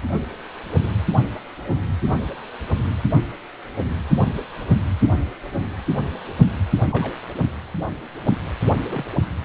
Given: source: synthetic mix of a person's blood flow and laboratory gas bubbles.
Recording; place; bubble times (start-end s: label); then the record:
Doppler ultrasound of blood flow; precordium
6.92-7.17 s: bubbles
8.77-8.86 s: bubbles
8.89-9.10 s: bubbles
From the record:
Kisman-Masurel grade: 121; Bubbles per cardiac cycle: 1 to 2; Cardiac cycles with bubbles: 10 to 50%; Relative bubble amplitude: barely perceptible (0.100 to 0.250); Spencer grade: 2 (many but less than half of the cardiac periods contain bubble signals, singularly or in groups); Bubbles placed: only in the low amplitude regions of the cardiac cycle